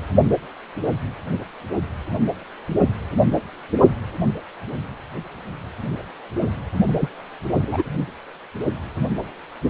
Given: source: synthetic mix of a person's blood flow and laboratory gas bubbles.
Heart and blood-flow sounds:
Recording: Doppler ultrasound of blood flow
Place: precordium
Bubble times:
6.87-7.08 s: bubbles
7.61-7.84 s: bubbles
From the record:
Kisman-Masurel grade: 122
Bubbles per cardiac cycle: 1 to 2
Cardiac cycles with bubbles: 10 to 50%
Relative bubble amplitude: moderate (0.250 to 0.450)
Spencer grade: 2 (many but less than half of the cardiac periods contain bubble signals, singularly or in groups)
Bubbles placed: only in the low amplitude regions of the cardiac cycle

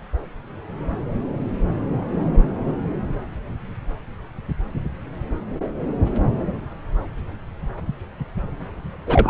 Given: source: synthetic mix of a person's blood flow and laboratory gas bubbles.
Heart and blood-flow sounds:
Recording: Doppler ultrasound of blood flow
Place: subclavian vein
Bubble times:
9.06-9.30 s: bubbles
From the record:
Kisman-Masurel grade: 223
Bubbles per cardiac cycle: several, 3 to 8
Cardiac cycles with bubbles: 10 to 50%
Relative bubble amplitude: loud (0.450 to 0.775)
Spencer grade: 2 (many but less than half of the cardiac periods contain bubble signals, singularly or in groups)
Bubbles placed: anywhere in the cardiac cycle

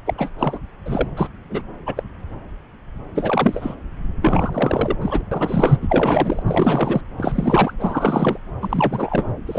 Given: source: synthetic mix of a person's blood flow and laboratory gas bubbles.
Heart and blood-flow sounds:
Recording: Doppler ultrasound of blood flow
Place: subclavian vein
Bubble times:
0.05-0.14 s: bubbles
0.18-0.30 s: bubbles
0.39-0.58 s: bubbles
0.85-1.08 s: bubbles
1.17-1.28 s: bubbles
1.50-1.62 s: bubbles
1.86-2.03 s: bubbles
3.15-3.76 s: bubbles
4.21-4.96 s: bubbles
5.01-5.22 s: bubbles
5.31-5.76 s: bubbles
5.81-6.43 s: bubbles
6.46-7.01 s: bubbles
7.17-7.73 s: bubbles
7.79-8.38 s: bubbles
8.61-9.32 s: bubbles
9.47-9.59 s: bubbles
From the record:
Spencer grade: 3 (all of the cardiac periods contain showers or single bubble signals, but not dominating or overriding the cardiac motion signals)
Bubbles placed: anywhere in the cardiac cycle

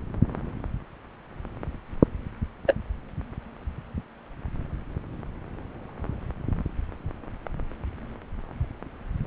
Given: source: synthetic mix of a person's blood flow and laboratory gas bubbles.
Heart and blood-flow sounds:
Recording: Doppler ultrasound of blood flow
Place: subclavian vein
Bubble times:
2.67-2.76 s: bubbles
From the record:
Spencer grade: 1 (occasional bubble signal discernible with the cardiac motion signal, with majority of cardiac periods free of bubbles)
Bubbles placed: anywhere in the cardiac cycle

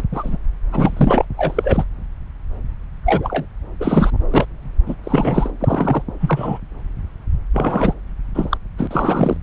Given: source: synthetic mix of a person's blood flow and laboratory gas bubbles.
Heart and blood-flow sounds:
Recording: Doppler ultrasound of blood flow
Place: subclavian vein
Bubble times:
0.00-0.02 s: bubbles
0.11-0.38 s: bubbles
0.72-1.25 s: bubbles
1.37-1.84 s: bubbles
3.05-3.46 s: bubbles
3.80-4.11 s: bubbles
4.31-4.46 s: bubbles
4.86-4.95 s: bubbles
5.04-5.51 s: bubbles
5.60-6.02 s: bubbles
6.20-6.59 s: bubbles
7.54-7.94 s: bubbles
8.34-8.58 s: bubbles
8.78-8.88 s: bubbles
8.90-9.37 s: bubbles
From the record:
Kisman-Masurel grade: 233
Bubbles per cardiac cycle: several, 3 to 8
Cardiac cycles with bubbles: 50 to 99%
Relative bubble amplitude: loud (0.450 to 0.775)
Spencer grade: 3 (all of the cardiac periods contain showers or single bubble signals, but not dominating or overriding the cardiac motion signals)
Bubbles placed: anywhere in the cardiac cycle

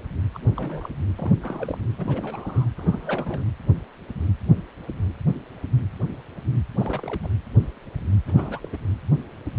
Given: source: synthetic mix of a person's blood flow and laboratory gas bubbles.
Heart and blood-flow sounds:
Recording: Doppler ultrasound of blood flow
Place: precordium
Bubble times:
0.33-0.39 s: bubbles
0.41-0.90 s: bubbles
1.19-1.32 s: bubbles
1.42-1.78 s: bubbles
1.98-2.68 s: bubbles
2.77-3.46 s: bubbles
6.77-7.19 s: bubbles
7.23-7.28 s: bubbles
8.27-8.69 s: bubbles
8.72-8.77 s: bubbles
From the record:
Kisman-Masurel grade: 221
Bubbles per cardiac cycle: several, 3 to 8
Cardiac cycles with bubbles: 10 to 50%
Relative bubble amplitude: barely perceptible (0.100 to 0.250)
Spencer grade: 2 (many but less than half of the cardiac periods contain bubble signals, singularly or in groups)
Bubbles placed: anywhere in the cardiac cycle

